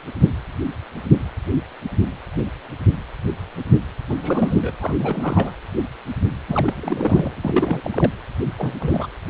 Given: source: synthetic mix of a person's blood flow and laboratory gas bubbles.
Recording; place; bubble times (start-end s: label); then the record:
Doppler ultrasound of blood flow; precordium
4.08-4.75 s: bubbles
4.80-5.53 s: bubbles
6.47-8.11 s: bubbles
8.58-8.74 s: bubbles
8.79-9.08 s: bubbles
From the record:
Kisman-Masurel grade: 222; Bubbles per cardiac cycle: several, 3 to 8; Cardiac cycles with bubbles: 10 to 50%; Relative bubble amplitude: moderate (0.250 to 0.450); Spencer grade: 2 (many but less than half of the cardiac periods contain bubble signals, singularly or in groups); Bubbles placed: anywhere in the cardiac cycle